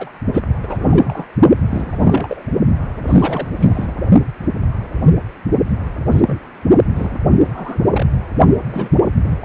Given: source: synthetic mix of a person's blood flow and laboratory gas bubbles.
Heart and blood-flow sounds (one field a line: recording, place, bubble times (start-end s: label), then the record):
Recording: Doppler ultrasound of blood flow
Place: precordium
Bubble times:
0.00-0.09 s: bubbles
0.33-0.42 s: bubbles
0.62-1.27 s: bubbles
1.56-2.42 s: bubbles
3.04-3.48 s: bubbles
3.59-3.94 s: bubbles
6.11-6.21 s: bubbles
6.26-6.41 s: bubbles
6.92-7.19 s: bubbles
7.25-7.83 s: bubbles
7.92-8.07 s: bubbles
8.68-8.89 s: bubbles
9.23-9.38 s: bubbles
From the record:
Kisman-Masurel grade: 232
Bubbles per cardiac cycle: several, 3 to 8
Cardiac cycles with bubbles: 50 to 99%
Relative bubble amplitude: moderate (0.250 to 0.450)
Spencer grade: 3 (all of the cardiac periods contain showers or single bubble signals, but not dominating or overriding the cardiac motion signals)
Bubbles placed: only in the low amplitude regions of the cardiac cycle